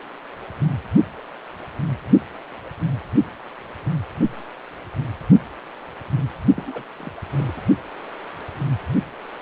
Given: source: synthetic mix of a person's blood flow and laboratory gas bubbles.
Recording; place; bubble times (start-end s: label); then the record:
Doppler ultrasound of blood flow; precordium
6.57-6.63 s: bubbles
6.66-6.83 s: bubbles
6.96-7.12 s: bubbles
7.37-7.61 s: bubbles
From the record:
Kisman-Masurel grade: 211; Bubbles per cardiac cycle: several, 3 to 8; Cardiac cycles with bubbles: 1 to 10%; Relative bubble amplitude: barely perceptible (0.100 to 0.250); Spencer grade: 1 (occasional bubble signal discernible with the cardiac motion signal, with majority of cardiac periods free of bubbles); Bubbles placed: only in the low amplitude regions of the cardiac cycle